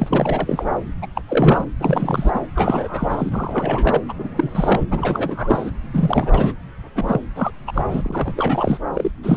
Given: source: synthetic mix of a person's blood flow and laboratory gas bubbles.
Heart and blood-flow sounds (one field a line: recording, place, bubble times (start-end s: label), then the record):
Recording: Doppler ultrasound of blood flow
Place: subclavian vein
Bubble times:
0.00-0.64 s: bubbles
1.02-1.06 s: bubbles
1.15-1.21 s: bubbles
1.28-1.65 s: bubbles
1.79-2.31 s: bubbles
2.33-2.41 s: bubbles
2.55-4.00 s: bubbles
4.08-4.28 s: bubbles
4.35-4.85 s: bubbles
4.90-5.71 s: bubbles
5.93-6.55 s: bubbles
6.95-7.21 s: bubbles
7.35-7.51 s: bubbles
7.67-7.82 s: bubbles
7.88-8.34 s: bubbles
8.37-8.79 s: bubbles
8.94-9.11 s: bubbles
9.23-9.37 s: bubbles
From the record:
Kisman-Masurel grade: 343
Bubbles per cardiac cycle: rolling drumbeat, 9 or more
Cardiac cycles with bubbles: 100%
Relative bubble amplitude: loud (0.450 to 0.775)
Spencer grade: 3 (all of the cardiac periods contain showers or single bubble signals, but not dominating or overriding the cardiac motion signals)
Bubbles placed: anywhere in the cardiac cycle